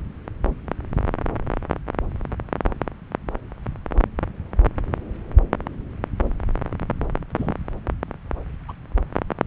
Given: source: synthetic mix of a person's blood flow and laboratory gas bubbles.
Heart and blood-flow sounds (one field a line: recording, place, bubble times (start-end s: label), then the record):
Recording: Doppler ultrasound of blood flow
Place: subclavian vein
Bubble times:
7.37-7.54 s: bubbles
8.69-8.72 s: bubbles
From the record:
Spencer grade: 1 (occasional bubble signal discernible with the cardiac motion signal, with majority of cardiac periods free of bubbles)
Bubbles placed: anywhere in the cardiac cycle